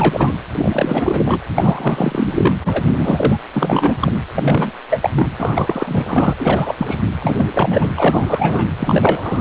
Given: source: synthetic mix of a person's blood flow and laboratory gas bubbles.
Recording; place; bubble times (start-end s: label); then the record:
Doppler ultrasound of blood flow; precordium
0.00-0.34 s: bubbles
0.52-1.38 s: bubbles
1.55-2.55 s: bubbles
2.64-3.38 s: bubbles
3.54-4.12 s: bubbles
4.34-4.71 s: bubbles
4.89-5.10 s: bubbles
5.14-5.27 s: bubbles
5.38-6.33 s: bubbles
6.38-6.75 s: bubbles
6.78-7.00 s: bubbles
7.19-7.50 s: bubbles
7.54-7.88 s: bubbles
7.96-8.69 s: bubbles
8.78-9.41 s: bubbles
From the record:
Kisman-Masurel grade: 343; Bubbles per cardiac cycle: rolling drumbeat, 9 or more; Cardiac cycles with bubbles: 100%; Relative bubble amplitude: loud (0.450 to 0.775); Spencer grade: 3 (all of the cardiac periods contain showers or single bubble signals, but not dominating or overriding the cardiac motion signals); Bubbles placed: anywhere in the cardiac cycle